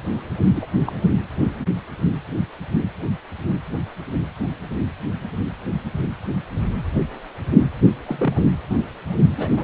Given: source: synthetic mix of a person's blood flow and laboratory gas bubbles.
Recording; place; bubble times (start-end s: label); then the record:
Doppler ultrasound of blood flow; precordium
0.52-0.66 s: bubbles
0.84-0.93 s: bubbles
8.03-8.39 s: bubbles
9.36-9.64 s: bubbles
From the record:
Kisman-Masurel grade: 121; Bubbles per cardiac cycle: 1 to 2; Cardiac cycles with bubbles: 10 to 50%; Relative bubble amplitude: barely perceptible (0.100 to 0.250); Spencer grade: 2 (many but less than half of the cardiac periods contain bubble signals, singularly or in groups); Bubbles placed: anywhere in the cardiac cycle